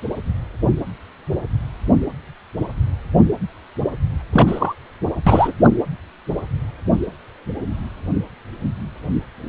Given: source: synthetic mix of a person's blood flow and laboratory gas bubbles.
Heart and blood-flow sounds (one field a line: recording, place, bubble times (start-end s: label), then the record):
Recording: Doppler ultrasound of blood flow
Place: precordium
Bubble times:
4.32-4.74 s: bubbles
5.26-5.54 s: bubbles
5.63-5.71 s: bubbles
From the record:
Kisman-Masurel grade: 213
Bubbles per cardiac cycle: several, 3 to 8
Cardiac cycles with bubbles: 1 to 10%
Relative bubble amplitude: loud (0.450 to 0.775)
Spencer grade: 1 (occasional bubble signal discernible with the cardiac motion signal, with majority of cardiac periods free of bubbles)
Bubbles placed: anywhere in the cardiac cycle